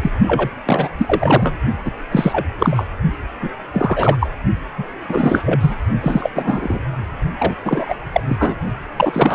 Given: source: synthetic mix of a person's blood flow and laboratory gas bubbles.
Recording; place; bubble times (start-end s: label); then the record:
Doppler ultrasound of blood flow; precordium
0.02-0.11 s: bubbles
0.27-0.51 s: bubbles
0.65-0.89 s: bubbles
0.97-1.56 s: bubbles
1.85-1.91 s: bubbles
2.11-2.46 s: bubbles
2.58-2.88 s: bubbles
3.42-3.49 s: bubbles
3.73-4.17 s: bubbles
4.20-4.29 s: bubbles
4.78-4.84 s: bubbles
5.08-5.42 s: bubbles
5.45-5.75 s: bubbles
6.00-6.30 s: bubbles
6.34-6.80 s: bubbles
7.38-7.55 s: bubbles
7.64-7.95 s: bubbles
8.12-8.21 s: bubbles
8.29-8.55 s: bubbles
8.96-9.35 s: bubbles
From the record:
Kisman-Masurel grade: 333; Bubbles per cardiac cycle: rolling drumbeat, 9 or more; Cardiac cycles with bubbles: 50 to 99%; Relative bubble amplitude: loud (0.450 to 0.775); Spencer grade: 3 (all of the cardiac periods contain showers or single bubble signals, but not dominating or overriding the cardiac motion signals); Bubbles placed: only in the low amplitude regions of the cardiac cycle